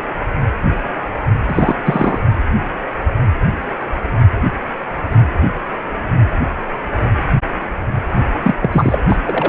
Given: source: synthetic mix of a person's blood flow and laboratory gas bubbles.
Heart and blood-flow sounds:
Doppler ultrasound of blood flow; precordium
1.48-1.76 s: bubbles
1.86-2.19 s: bubbles
8.44-8.55 s: bubbles
8.61-9.04 s: bubbles
9.08-9.16 s: bubbles
9.24-9.49 s: bubbles
From the record:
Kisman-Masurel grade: 223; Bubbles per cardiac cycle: several, 3 to 8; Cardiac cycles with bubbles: 10 to 50%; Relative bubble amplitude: loud (0.450 to 0.775); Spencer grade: 2 (many but less than half of the cardiac periods contain bubble signals, singularly or in groups); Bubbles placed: only in the low amplitude regions of the cardiac cycle

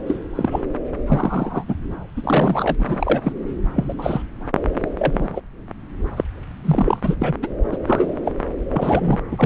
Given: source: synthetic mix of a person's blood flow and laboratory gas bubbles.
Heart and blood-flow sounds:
Doppler ultrasound of blood flow; subclavian vein
0.07-0.16 s: bubbles
0.35-0.65 s: bubbles
1.06-1.63 s: bubbles
1.68-1.75 s: bubbles
2.17-2.75 s: bubbles
2.78-3.32 s: bubbles
3.75-3.85 s: bubbles
3.88-3.94 s: bubbles
3.98-4.22 s: bubbles
4.96-5.41 s: bubbles
6.17-6.24 s: bubbles
6.63-7.16 s: bubbles
7.20-7.36 s: bubbles
7.42-7.48 s: bubbles
7.72-7.77 s: bubbles
7.87-8.12 s: bubbles
8.25-8.32 s: bubbles
8.69-9.19 s: bubbles
9.31-9.46 s: bubbles
From the record:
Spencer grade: 3 (all of the cardiac periods contain showers or single bubble signals, but not dominating or overriding the cardiac motion signals); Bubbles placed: anywhere in the cardiac cycle

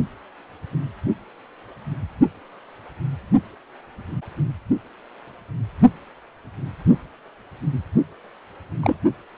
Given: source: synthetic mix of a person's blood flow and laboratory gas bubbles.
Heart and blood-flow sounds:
Doppler ultrasound of blood flow; precordium
6.88-6.97 s: bubbles
8.83-8.96 s: bubbles
From the record:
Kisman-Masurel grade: 122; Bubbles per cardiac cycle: 1 to 2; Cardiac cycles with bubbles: 10 to 50%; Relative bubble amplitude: moderate (0.250 to 0.450); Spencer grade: 2 (many but less than half of the cardiac periods contain bubble signals, singularly or in groups); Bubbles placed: only in the low amplitude regions of the cardiac cycle

